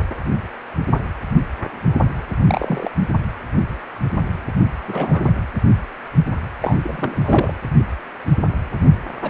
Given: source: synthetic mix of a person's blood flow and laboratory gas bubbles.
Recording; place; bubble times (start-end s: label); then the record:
Doppler ultrasound of blood flow; precordium
2.45-2.90 s: bubbles
4.83-5.33 s: bubbles
6.61-6.76 s: bubbles
6.82-7.54 s: bubbles
9.22-9.30 s: bubbles
From the record:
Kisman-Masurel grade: 232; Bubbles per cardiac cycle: several, 3 to 8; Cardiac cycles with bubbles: 50 to 99%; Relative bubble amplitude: moderate (0.250 to 0.450); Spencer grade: 3 (all of the cardiac periods contain showers or single bubble signals, but not dominating or overriding the cardiac motion signals); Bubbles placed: anywhere in the cardiac cycle